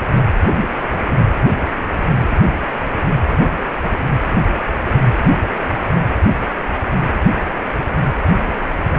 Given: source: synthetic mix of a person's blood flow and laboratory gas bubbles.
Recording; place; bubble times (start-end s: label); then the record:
Doppler ultrasound of blood flow; precordium
no bubbles
From the record:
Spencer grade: 0 (complete lack of bubble signals)